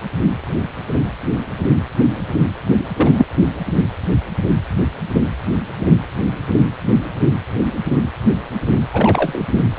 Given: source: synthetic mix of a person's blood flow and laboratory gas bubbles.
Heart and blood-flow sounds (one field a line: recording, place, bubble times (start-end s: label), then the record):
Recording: Doppler ultrasound of blood flow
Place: precordium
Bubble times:
2.96-3.27 s: bubbles
8.93-9.42 s: bubbles
9.77-9.79 s: bubbles
From the record:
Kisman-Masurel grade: 223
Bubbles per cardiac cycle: several, 3 to 8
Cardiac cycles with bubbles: 10 to 50%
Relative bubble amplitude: loud (0.450 to 0.775)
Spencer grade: 2 (many but less than half of the cardiac periods contain bubble signals, singularly or in groups)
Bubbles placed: anywhere in the cardiac cycle